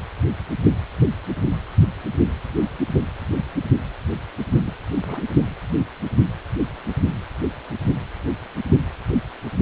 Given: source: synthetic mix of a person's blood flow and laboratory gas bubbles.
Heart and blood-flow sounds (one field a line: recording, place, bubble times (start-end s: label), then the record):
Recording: Doppler ultrasound of blood flow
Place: precordium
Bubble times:
4.60-4.72 s: bubbles
5.05-5.22 s: bubbles
From the record:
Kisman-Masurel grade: 221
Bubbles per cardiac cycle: several, 3 to 8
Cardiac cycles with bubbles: 10 to 50%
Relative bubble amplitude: barely perceptible (0.100 to 0.250)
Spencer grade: 2 (many but less than half of the cardiac periods contain bubble signals, singularly or in groups)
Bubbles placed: only in the low amplitude regions of the cardiac cycle